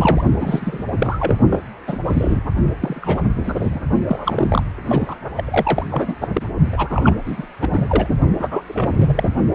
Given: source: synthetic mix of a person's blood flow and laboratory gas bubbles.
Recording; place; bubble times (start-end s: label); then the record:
Doppler ultrasound of blood flow; precordium
0.00-0.24 s: bubbles
0.36-0.84 s: bubbles
0.98-1.36 s: bubbles
1.50-1.60 s: bubbles
1.87-2.00 s: bubbles
2.04-2.43 s: bubbles
2.81-3.22 s: bubbles
3.43-3.54 s: bubbles
3.58-3.85 s: bubbles
4.07-4.62 s: bubbles
4.88-5.15 s: bubbles
5.36-5.84 s: bubbles
5.88-6.16 s: bubbles
6.21-6.27 s: bubbles
6.34-6.42 s: bubbles
6.72-7.15 s: bubbles
7.25-7.46 s: bubbles
7.61-7.85 s: bubbles
7.88-8.08 s: bubbles
8.39-8.64 s: bubbles
8.66-9.29 s: bubbles
From the record:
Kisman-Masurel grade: 343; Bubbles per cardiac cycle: rolling drumbeat, 9 or more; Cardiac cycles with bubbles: 100%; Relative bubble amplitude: loud (0.450 to 0.775); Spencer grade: 3 (all of the cardiac periods contain showers or single bubble signals, but not dominating or overriding the cardiac motion signals); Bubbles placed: only in the low amplitude regions of the cardiac cycle